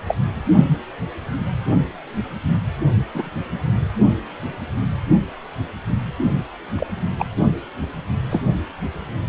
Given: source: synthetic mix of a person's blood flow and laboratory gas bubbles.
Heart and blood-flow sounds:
Doppler ultrasound of blood flow; precordium
0.08-0.15 s: bubbles
3.14-3.29 s: bubbles
6.76-6.87 s: bubbles
7.19-7.26 s: bubbles
8.30-8.43 s: bubbles
From the record:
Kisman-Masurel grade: 122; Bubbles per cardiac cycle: 1 to 2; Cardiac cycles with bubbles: 10 to 50%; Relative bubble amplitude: moderate (0.250 to 0.450); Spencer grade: 2 (many but less than half of the cardiac periods contain bubble signals, singularly or in groups); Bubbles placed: only in the low amplitude regions of the cardiac cycle

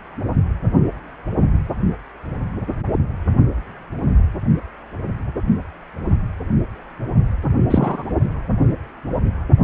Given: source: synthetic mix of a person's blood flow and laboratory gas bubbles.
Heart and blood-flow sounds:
Doppler ultrasound of blood flow; precordium
7.68-8.05 s: bubbles
From the record:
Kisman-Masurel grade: 223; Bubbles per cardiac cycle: several, 3 to 8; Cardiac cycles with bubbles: 10 to 50%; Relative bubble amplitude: loud (0.450 to 0.775); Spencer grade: 2 (many but less than half of the cardiac periods contain bubble signals, singularly or in groups); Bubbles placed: only in the low amplitude regions of the cardiac cycle

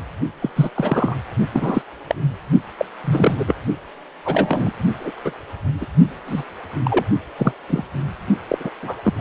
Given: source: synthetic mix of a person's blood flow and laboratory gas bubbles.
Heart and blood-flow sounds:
Doppler ultrasound of blood flow; precordium
0.42-0.49 s: bubbles
0.55-0.70 s: bubbles
0.75-1.16 s: bubbles
1.53-1.82 s: bubbles
2.07-2.16 s: bubbles
2.79-2.86 s: bubbles
3.04-3.37 s: bubbles
3.39-3.54 s: bubbles
4.25-4.72 s: bubbles
5.00-5.12 s: bubbles
5.25-5.33 s: bubbles
5.80-5.85 s: bubbles
6.26-6.43 s: bubbles
6.84-7.05 s: bubbles
7.38-7.53 s: bubbles
7.69-7.84 s: bubbles
8.48-8.70 s: bubbles
8.82-8.96 s: bubbles
9.04-9.13 s: bubbles
9.16-9.21 s: bubbles
From the record:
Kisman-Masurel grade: 242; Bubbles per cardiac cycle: several, 3 to 8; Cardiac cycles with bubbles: 100%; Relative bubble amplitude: moderate (0.250 to 0.450); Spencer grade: 3 (all of the cardiac periods contain showers or single bubble signals, but not dominating or overriding the cardiac motion signals); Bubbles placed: only in the low amplitude regions of the cardiac cycle

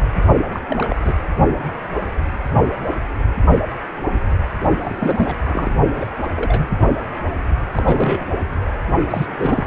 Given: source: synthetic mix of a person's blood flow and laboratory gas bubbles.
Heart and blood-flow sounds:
Doppler ultrasound of blood flow; precordium
0.00-0.02 s: bubbles
0.52-0.59 s: bubbles
0.68-0.96 s: bubbles
1.04-1.13 s: bubbles
4.76-5.35 s: bubbles
5.40-5.75 s: bubbles
5.96-6.06 s: bubbles
6.36-6.68 s: bubbles
6.77-6.91 s: bubbles
7.75-8.26 s: bubbles
9.10-9.67 s: bubbles
From the record:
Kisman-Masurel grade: 232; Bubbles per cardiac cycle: several, 3 to 8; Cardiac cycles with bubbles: 50 to 99%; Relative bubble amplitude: moderate (0.250 to 0.450); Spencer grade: 3 (all of the cardiac periods contain showers or single bubble signals, but not dominating or overriding the cardiac motion signals); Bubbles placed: only in the low amplitude regions of the cardiac cycle

